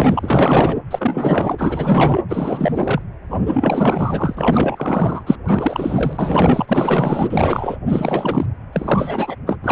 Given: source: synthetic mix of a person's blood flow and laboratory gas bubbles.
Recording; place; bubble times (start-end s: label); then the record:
Doppler ultrasound of blood flow; precordium
0.00-0.76 s: bubbles
0.91-1.55 s: bubbles
1.58-2.21 s: bubbles
2.28-3.01 s: bubbles
3.30-3.36 s: bubbles
3.45-5.23 s: bubbles
5.26-5.37 s: bubbles
5.46-7.76 s: bubbles
7.88-8.46 s: bubbles
8.72-9.36 s: bubbles
9.46-9.56 s: bubbles
9.62-9.72 s: bubbles
From the record:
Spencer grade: 4 (maximum detectable bubble signal sounding continuously throughout systole and diastole of every cardiac period, and overriding the amplitude of the normal cardiac signals); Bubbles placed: anywhere in the cardiac cycle